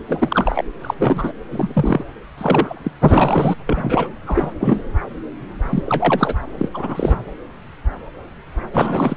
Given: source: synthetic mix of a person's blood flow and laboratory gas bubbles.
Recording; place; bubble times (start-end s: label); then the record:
Doppler ultrasound of blood flow; subclavian vein
0.06-0.64 s: bubbles
0.81-0.94 s: bubbles
0.99-1.32 s: bubbles
1.52-2.04 s: bubbles
2.38-2.91 s: bubbles
3.02-3.55 s: bubbles
3.67-4.09 s: bubbles
4.26-4.51 s: bubbles
4.60-4.82 s: bubbles
5.62-6.34 s: bubbles
6.58-6.69 s: bubbles
6.74-7.24 s: bubbles
8.73-9.17 s: bubbles
From the record:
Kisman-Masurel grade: 233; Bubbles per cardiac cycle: several, 3 to 8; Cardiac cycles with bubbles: 50 to 99%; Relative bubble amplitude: loud (0.450 to 0.775); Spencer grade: 3 (all of the cardiac periods contain showers or single bubble signals, but not dominating or overriding the cardiac motion signals); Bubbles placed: anywhere in the cardiac cycle